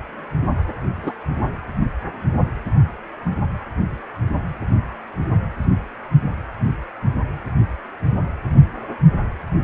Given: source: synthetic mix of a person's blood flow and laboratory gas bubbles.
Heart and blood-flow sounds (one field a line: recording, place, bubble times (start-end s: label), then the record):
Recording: Doppler ultrasound of blood flow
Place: precordium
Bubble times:
1.02-1.12 s: bubbles
From the record:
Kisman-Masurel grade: 112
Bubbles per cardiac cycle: 1 to 2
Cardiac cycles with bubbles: 1 to 10%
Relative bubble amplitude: moderate (0.250 to 0.450)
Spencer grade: 1 (occasional bubble signal discernible with the cardiac motion signal, with majority of cardiac periods free of bubbles)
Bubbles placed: anywhere in the cardiac cycle